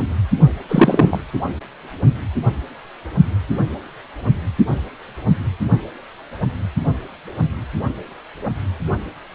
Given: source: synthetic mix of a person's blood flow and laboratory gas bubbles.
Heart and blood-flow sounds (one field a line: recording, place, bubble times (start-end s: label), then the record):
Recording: Doppler ultrasound of blood flow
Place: precordium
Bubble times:
0.69-1.23 s: bubbles
From the record:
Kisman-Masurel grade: 223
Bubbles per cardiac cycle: several, 3 to 8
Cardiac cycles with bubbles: 10 to 50%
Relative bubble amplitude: loud (0.450 to 0.775)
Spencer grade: 2 (many but less than half of the cardiac periods contain bubble signals, singularly or in groups)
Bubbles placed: only in the low amplitude regions of the cardiac cycle